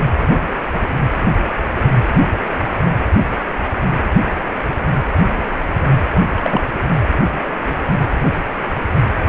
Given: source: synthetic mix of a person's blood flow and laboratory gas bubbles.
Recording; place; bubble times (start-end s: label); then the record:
Doppler ultrasound of blood flow; precordium
6.36-6.61 s: bubbles
From the record:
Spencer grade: 1 (occasional bubble signal discernible with the cardiac motion signal, with majority of cardiac periods free of bubbles); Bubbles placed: anywhere in the cardiac cycle